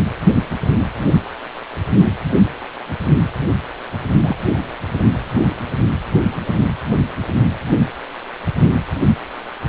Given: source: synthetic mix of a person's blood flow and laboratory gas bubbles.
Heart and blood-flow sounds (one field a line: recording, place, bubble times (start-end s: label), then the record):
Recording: Doppler ultrasound of blood flow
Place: precordium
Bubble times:
4.24-4.36 s: bubbles
From the record:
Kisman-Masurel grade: 112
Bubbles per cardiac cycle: 1 to 2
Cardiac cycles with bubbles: 1 to 10%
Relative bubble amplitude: moderate (0.250 to 0.450)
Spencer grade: 1 (occasional bubble signal discernible with the cardiac motion signal, with majority of cardiac periods free of bubbles)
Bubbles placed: anywhere in the cardiac cycle